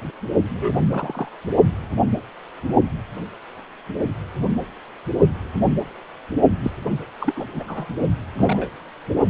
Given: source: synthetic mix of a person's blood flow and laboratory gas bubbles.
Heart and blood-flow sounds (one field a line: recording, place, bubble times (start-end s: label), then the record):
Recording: Doppler ultrasound of blood flow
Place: precordium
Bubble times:
0.49-0.75 s: bubbles
0.91-1.29 s: bubbles
6.63-6.71 s: bubbles
7.19-7.46 s: bubbles
7.56-7.64 s: bubbles
7.68-7.86 s: bubbles
8.38-8.71 s: bubbles
9.26-9.30 s: bubbles
From the record:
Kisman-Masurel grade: 222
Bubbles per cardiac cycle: several, 3 to 8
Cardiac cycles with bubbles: 10 to 50%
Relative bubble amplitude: moderate (0.250 to 0.450)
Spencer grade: 2 (many but less than half of the cardiac periods contain bubble signals, singularly or in groups)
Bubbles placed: only in the low amplitude regions of the cardiac cycle